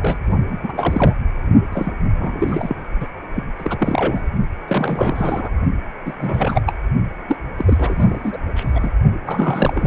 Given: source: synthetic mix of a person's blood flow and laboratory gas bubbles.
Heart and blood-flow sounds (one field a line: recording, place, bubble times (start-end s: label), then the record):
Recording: Doppler ultrasound of blood flow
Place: precordium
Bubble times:
0.01-0.17 s: bubbles
0.46-1.15 s: bubbles
1.72-1.92 s: bubbles
2.18-2.75 s: bubbles
3.00-3.07 s: bubbles
3.35-3.44 s: bubbles
3.58-4.26 s: bubbles
4.68-5.50 s: bubbles
6.04-6.14 s: bubbles
6.18-6.61 s: bubbles
6.66-6.74 s: bubbles
7.28-7.38 s: bubbles
7.58-8.37 s: bubbles
8.55-8.92 s: bubbles
9.26-9.87 s: bubbles
From the record:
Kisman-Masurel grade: 342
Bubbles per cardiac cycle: rolling drumbeat, 9 or more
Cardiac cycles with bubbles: 100%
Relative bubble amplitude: moderate (0.250 to 0.450)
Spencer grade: 3 (all of the cardiac periods contain showers or single bubble signals, but not dominating or overriding the cardiac motion signals)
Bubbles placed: only in the low amplitude regions of the cardiac cycle